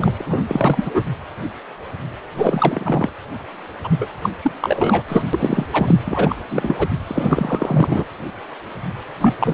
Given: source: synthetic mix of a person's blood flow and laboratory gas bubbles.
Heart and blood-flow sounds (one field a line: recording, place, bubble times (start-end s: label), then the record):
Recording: Doppler ultrasound of blood flow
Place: precordium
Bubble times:
0.00-0.22 s: bubbles
0.26-0.40 s: bubbles
0.49-0.91 s: bubbles
0.94-1.03 s: bubbles
2.36-3.09 s: bubbles
3.83-4.10 s: bubbles
4.21-4.29 s: bubbles
4.42-4.52 s: bubbles
4.62-5.02 s: bubbles
5.08-5.26 s: bubbles
5.33-5.66 s: bubbles
5.72-5.96 s: bubbles
6.06-6.36 s: bubbles
6.50-6.75 s: bubbles
6.79-6.88 s: bubbles
7.07-8.04 s: bubbles
9.21-9.35 s: bubbles
9.39-9.54 s: bubbles
From the record:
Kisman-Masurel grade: 333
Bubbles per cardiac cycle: rolling drumbeat, 9 or more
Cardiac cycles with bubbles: 50 to 99%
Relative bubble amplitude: loud (0.450 to 0.775)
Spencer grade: 3 (all of the cardiac periods contain showers or single bubble signals, but not dominating or overriding the cardiac motion signals)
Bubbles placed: anywhere in the cardiac cycle